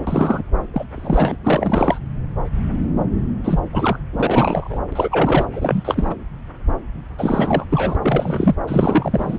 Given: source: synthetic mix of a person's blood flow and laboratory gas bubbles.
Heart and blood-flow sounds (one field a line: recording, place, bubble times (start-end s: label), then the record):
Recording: Doppler ultrasound of blood flow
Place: subclavian vein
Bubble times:
0.00-0.04 s: bubbles
0.07-0.42 s: bubbles
0.73-0.84 s: bubbles
0.91-1.35 s: bubbles
1.43-1.98 s: bubbles
3.44-3.60 s: bubbles
3.72-3.99 s: bubbles
4.12-4.79 s: bubbles
4.92-5.46 s: bubbles
5.53-6.15 s: bubbles
7.18-7.65 s: bubbles
7.70-7.96 s: bubbles
8.01-8.55 s: bubbles
8.67-9.38 s: bubbles
From the record:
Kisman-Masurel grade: 332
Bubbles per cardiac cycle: rolling drumbeat, 9 or more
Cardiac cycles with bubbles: 50 to 99%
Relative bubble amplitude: moderate (0.250 to 0.450)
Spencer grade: 3 (all of the cardiac periods contain showers or single bubble signals, but not dominating or overriding the cardiac motion signals)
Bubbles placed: anywhere in the cardiac cycle